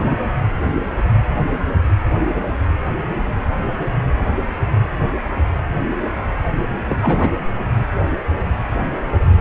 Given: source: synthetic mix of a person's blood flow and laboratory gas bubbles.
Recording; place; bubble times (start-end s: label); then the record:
Doppler ultrasound of blood flow; precordium
0.06-0.15 s: bubbles
6.88-7.29 s: bubbles
From the record:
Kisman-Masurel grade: 123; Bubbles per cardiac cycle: 1 to 2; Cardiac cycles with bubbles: 10 to 50%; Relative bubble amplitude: loud (0.450 to 0.775); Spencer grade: 2 (many but less than half of the cardiac periods contain bubble signals, singularly or in groups); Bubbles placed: anywhere in the cardiac cycle